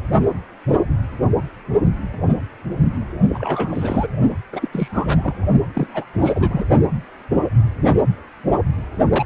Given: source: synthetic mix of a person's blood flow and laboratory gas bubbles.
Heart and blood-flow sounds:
Doppler ultrasound of blood flow; precordium
3.29-4.08 s: bubbles
4.52-4.68 s: bubbles
4.72-5.33 s: bubbles
5.75-6.05 s: bubbles
6.13-6.65 s: bubbles
9.12-9.25 s: bubbles
From the record:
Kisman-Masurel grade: 332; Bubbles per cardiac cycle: rolling drumbeat, 9 or more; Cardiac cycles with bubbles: 50 to 99%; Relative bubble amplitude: moderate (0.250 to 0.450); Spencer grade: 3 (all of the cardiac periods contain showers or single bubble signals, but not dominating or overriding the cardiac motion signals); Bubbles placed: only in the low amplitude regions of the cardiac cycle

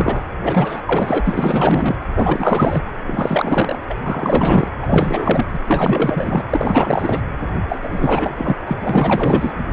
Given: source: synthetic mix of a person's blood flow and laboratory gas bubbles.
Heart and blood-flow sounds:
Doppler ultrasound of blood flow; precordium
0.00-0.22 s: bubbles
0.43-0.80 s: bubbles
0.85-1.21 s: bubbles
1.24-1.96 s: bubbles
2.15-2.83 s: bubbles
3.06-3.79 s: bubbles
3.90-3.94 s: bubbles
4.03-4.68 s: bubbles
4.82-5.45 s: bubbles
5.53-5.59 s: bubbles
5.66-6.44 s: bubbles
6.50-7.21 s: bubbles
7.69-8.56 s: bubbles
8.67-8.73 s: bubbles
8.79-9.52 s: bubbles
From the record:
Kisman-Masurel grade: 444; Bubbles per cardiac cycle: continuous sound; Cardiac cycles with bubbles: 100%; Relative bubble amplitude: maximal (0.775 to 0.999); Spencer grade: 4 (maximum detectable bubble signal sounding continuously throughout systole and diastole of every cardiac period, and overriding the amplitude of the normal cardiac signals); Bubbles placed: anywhere in the cardiac cycle

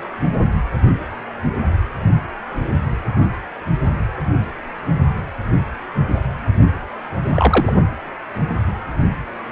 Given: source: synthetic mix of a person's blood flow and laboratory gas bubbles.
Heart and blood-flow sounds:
Doppler ultrasound of blood flow; precordium
7.28-7.72 s: bubbles
From the record:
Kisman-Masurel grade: 113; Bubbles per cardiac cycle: 1 to 2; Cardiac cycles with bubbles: 1 to 10%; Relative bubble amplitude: loud (0.450 to 0.775); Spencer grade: 1 (occasional bubble signal discernible with the cardiac motion signal, with majority of cardiac periods free of bubbles); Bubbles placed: only in the low amplitude regions of the cardiac cycle

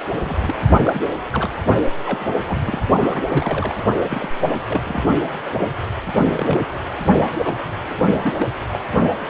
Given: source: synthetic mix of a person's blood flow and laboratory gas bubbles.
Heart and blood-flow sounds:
Doppler ultrasound of blood flow; precordium
0.10-0.57 s: bubbles
0.85-1.04 s: bubbles
1.33-1.50 s: bubbles
2.06-2.27 s: bubbles
2.47-2.58 s: bubbles
2.65-2.86 s: bubbles
2.98-3.75 s: bubbles
4.08-4.29 s: bubbles
4.42-4.50 s: bubbles
4.68-5.04 s: bubbles
5.51-5.68 s: bubbles
6.06-6.61 s: bubbles
7.42-7.54 s: bubbles
7.89-7.95 s: bubbles
8.19-8.47 s: bubbles
8.70-8.79 s: bubbles
9.20-9.29 s: bubbles
From the record:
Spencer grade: 3 (all of the cardiac periods contain showers or single bubble signals, but not dominating or overriding the cardiac motion signals); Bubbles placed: only in the low amplitude regions of the cardiac cycle

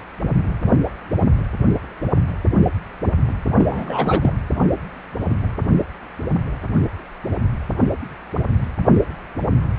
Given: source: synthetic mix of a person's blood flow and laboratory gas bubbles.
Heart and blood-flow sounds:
Doppler ultrasound of blood flow; precordium
3.58-4.33 s: bubbles
From the record:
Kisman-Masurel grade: 212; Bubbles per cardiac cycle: several, 3 to 8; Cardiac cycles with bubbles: 1 to 10%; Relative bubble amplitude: moderate (0.250 to 0.450); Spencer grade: 1 (occasional bubble signal discernible with the cardiac motion signal, with majority of cardiac periods free of bubbles); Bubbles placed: anywhere in the cardiac cycle

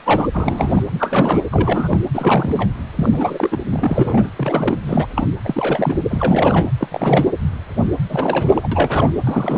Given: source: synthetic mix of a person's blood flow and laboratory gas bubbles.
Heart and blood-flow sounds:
Doppler ultrasound of blood flow; precordium
0.04-0.30 s: bubbles
0.32-0.83 s: bubbles
0.91-1.40 s: bubbles
1.52-2.00 s: bubbles
2.14-2.69 s: bubbles
2.96-3.59 s: bubbles
3.66-4.30 s: bubbles
4.37-4.81 s: bubbles
4.86-5.07 s: bubbles
5.15-5.29 s: bubbles
5.44-5.97 s: bubbles
6.10-6.67 s: bubbles
6.78-6.88 s: bubbles
6.91-7.25 s: bubbles
8.08-8.67 s: bubbles
8.71-9.13 s: bubbles
9.24-9.58 s: bubbles
From the record:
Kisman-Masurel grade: 332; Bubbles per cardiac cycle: rolling drumbeat, 9 or more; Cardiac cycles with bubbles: 50 to 99%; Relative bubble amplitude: moderate (0.250 to 0.450); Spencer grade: 3 (all of the cardiac periods contain showers or single bubble signals, but not dominating or overriding the cardiac motion signals); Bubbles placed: anywhere in the cardiac cycle

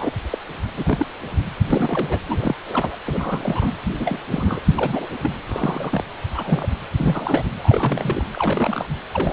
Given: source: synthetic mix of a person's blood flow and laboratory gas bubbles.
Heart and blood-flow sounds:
Doppler ultrasound of blood flow; precordium
0.00-0.13 s: bubbles
0.30-0.38 s: bubbles
0.77-1.07 s: bubbles
1.71-2.19 s: bubbles
2.27-2.55 s: bubbles
2.69-2.96 s: bubbles
3.06-3.72 s: bubbles
3.89-3.94 s: bubbles
3.96-4.18 s: bubbles
4.32-4.61 s: bubbles
4.75-5.08 s: bubbles
5.23-5.31 s: bubbles
5.46-6.04 s: bubbles
6.33-6.68 s: bubbles
6.96-7.45 s: bubbles
7.57-8.25 s: bubbles
8.33-8.99 s: bubbles
9.12-9.33 s: bubbles
From the record:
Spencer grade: 3 (all of the cardiac periods contain showers or single bubble signals, but not dominating or overriding the cardiac motion signals); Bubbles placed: anywhere in the cardiac cycle

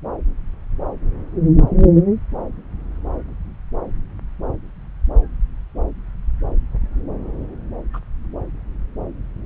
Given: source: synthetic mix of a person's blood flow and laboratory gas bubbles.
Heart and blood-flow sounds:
Doppler ultrasound of blood flow; subclavian vein
7.93-8.00 s: bubbles
From the record:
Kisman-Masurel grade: 111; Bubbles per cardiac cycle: 1 to 2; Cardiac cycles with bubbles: 1 to 10%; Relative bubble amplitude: barely perceptible (0.100 to 0.250); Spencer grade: 1 (occasional bubble signal discernible with the cardiac motion signal, with majority of cardiac periods free of bubbles); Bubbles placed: anywhere in the cardiac cycle

